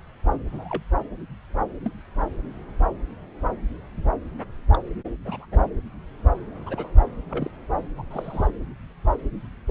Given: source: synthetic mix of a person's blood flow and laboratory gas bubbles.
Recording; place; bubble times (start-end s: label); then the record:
Doppler ultrasound of blood flow; subclavian vein
0.52-0.82 s: bubbles
1.82-1.93 s: bubbles
4.73-4.83 s: bubbles
5.25-5.46 s: bubbles
5.52-5.64 s: bubbles
6.66-6.89 s: bubbles
7.29-7.50 s: bubbles
7.98-8.03 s: bubbles
8.10-8.47 s: bubbles
From the record:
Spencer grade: 2 (many but less than half of the cardiac periods contain bubble signals, singularly or in groups); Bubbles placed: anywhere in the cardiac cycle